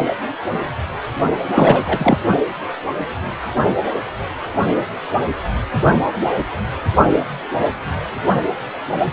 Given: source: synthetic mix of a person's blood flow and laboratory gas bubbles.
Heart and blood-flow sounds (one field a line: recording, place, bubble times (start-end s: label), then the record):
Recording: Doppler ultrasound of blood flow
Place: precordium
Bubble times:
1.54-2.19 s: bubbles
From the record:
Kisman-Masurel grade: 213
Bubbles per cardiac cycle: several, 3 to 8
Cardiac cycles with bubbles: 1 to 10%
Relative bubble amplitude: loud (0.450 to 0.775)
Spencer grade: 1 (occasional bubble signal discernible with the cardiac motion signal, with majority of cardiac periods free of bubbles)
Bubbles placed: only in the low amplitude regions of the cardiac cycle